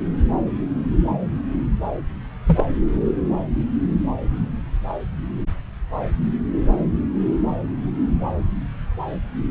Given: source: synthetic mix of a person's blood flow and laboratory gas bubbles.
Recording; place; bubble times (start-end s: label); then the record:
Doppler ultrasound of blood flow; subclavian vein
2.47-2.65 s: bubbles
From the record:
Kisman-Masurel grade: 112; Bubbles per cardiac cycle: 1 to 2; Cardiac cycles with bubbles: 1 to 10%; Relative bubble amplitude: moderate (0.250 to 0.450); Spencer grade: 1 (occasional bubble signal discernible with the cardiac motion signal, with majority of cardiac periods free of bubbles); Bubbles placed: anywhere in the cardiac cycle